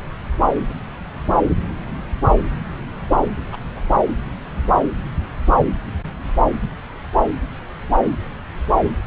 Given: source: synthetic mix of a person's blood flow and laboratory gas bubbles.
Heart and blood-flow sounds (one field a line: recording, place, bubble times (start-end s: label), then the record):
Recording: Doppler ultrasound of blood flow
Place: subclavian vein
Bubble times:
0.68-0.73 s: bubbles
3.52-3.56 s: bubbles
3.75-3.79 s: bubbles
From the record:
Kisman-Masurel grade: 111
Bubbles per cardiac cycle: 1 to 2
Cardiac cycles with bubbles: 1 to 10%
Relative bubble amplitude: barely perceptible (0.100 to 0.250)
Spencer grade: 1 (occasional bubble signal discernible with the cardiac motion signal, with majority of cardiac periods free of bubbles)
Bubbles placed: anywhere in the cardiac cycle